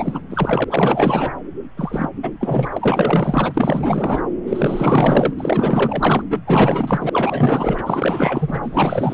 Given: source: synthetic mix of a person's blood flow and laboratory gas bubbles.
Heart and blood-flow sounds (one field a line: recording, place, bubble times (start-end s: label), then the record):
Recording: Doppler ultrasound of blood flow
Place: subclavian vein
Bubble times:
0.00-0.21 s: bubbles
0.29-0.65 s: bubbles
0.70-1.32 s: bubbles
1.76-2.11 s: bubbles
2.22-2.31 s: bubbles
2.40-2.67 s: bubbles
2.72-4.22 s: bubbles
4.46-5.33 s: bubbles
5.39-6.25 s: bubbles
6.29-6.40 s: bubbles
6.46-7.10 s: bubbles
7.12-9.14 s: bubbles
From the record:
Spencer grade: 4 (maximum detectable bubble signal sounding continuously throughout systole and diastole of every cardiac period, and overriding the amplitude of the normal cardiac signals)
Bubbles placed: anywhere in the cardiac cycle